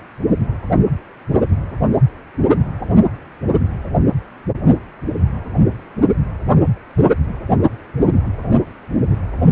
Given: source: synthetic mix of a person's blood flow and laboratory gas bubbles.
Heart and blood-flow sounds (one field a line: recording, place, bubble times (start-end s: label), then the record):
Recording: Doppler ultrasound of blood flow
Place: precordium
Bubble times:
no bubbles
From the record:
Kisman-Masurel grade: 000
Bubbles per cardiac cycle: 0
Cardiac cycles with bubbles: 0%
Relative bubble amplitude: no bubbles discernible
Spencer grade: 0 (complete lack of bubble signals)